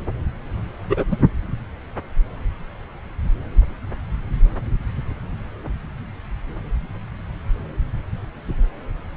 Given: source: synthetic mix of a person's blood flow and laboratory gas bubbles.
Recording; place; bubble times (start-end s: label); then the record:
Doppler ultrasound of blood flow; subclavian vein
0.89-1.05 s: bubbles
1.11-1.17 s: bubbles
From the record:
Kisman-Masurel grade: 212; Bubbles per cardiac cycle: several, 3 to 8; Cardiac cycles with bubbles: 1 to 10%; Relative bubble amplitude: moderate (0.250 to 0.450); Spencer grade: 1 (occasional bubble signal discernible with the cardiac motion signal, with majority of cardiac periods free of bubbles); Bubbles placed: anywhere in the cardiac cycle